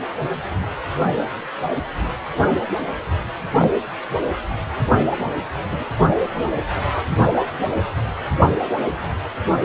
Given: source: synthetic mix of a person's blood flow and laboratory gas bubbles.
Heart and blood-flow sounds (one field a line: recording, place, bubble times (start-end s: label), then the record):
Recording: Doppler ultrasound of blood flow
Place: precordium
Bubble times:
3.57-3.71 s: bubbles
5.71-5.85 s: bubbles
From the record:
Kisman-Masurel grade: 122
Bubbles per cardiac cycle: 1 to 2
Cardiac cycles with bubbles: 10 to 50%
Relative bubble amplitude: moderate (0.250 to 0.450)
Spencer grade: 2 (many but less than half of the cardiac periods contain bubble signals, singularly or in groups)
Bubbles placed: anywhere in the cardiac cycle